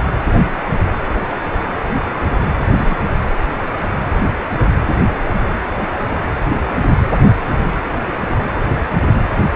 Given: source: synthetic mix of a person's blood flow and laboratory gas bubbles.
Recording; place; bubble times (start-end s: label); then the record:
Doppler ultrasound of blood flow; precordium
2.75-3.08 s: bubbles
From the record:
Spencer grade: 1 (occasional bubble signal discernible with the cardiac motion signal, with majority of cardiac periods free of bubbles); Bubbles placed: anywhere in the cardiac cycle